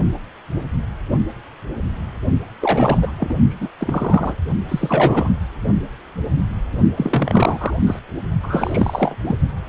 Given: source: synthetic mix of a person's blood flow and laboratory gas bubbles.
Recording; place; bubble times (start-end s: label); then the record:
Doppler ultrasound of blood flow; precordium
2.60-3.12 s: bubbles
3.17-3.35 s: bubbles
3.50-3.68 s: bubbles
3.81-4.34 s: bubbles
4.68-5.32 s: bubbles
6.97-7.77 s: bubbles
7.86-8.01 s: bubbles
8.43-9.15 s: bubbles
9.24-9.36 s: bubbles
From the record:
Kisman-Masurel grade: 233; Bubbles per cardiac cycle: several, 3 to 8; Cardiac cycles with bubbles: 50 to 99%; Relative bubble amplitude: loud (0.450 to 0.775); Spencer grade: 3 (all of the cardiac periods contain showers or single bubble signals, but not dominating or overriding the cardiac motion signals); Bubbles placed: only in the low amplitude regions of the cardiac cycle